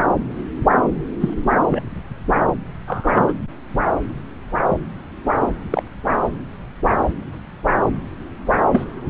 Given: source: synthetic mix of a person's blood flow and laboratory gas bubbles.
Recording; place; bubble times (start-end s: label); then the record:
Doppler ultrasound of blood flow; subclavian vein
1.20-1.33 s: bubbles
1.68-1.82 s: bubbles
2.88-3.33 s: bubbles
5.70-5.83 s: bubbles
8.71-8.85 s: bubbles
From the record:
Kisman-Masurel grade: 122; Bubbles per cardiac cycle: 1 to 2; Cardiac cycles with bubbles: 10 to 50%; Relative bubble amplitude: moderate (0.250 to 0.450); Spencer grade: 2 (many but less than half of the cardiac periods contain bubble signals, singularly or in groups); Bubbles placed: anywhere in the cardiac cycle